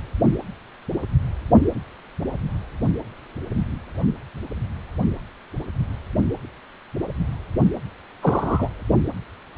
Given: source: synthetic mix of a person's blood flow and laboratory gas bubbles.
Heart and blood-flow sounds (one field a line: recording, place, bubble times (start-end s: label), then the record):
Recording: Doppler ultrasound of blood flow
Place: precordium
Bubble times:
8.22-8.69 s: bubbles
From the record:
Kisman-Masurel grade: 113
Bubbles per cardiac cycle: 1 to 2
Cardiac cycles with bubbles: 1 to 10%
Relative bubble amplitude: loud (0.450 to 0.775)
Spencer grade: 1 (occasional bubble signal discernible with the cardiac motion signal, with majority of cardiac periods free of bubbles)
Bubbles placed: only in the low amplitude regions of the cardiac cycle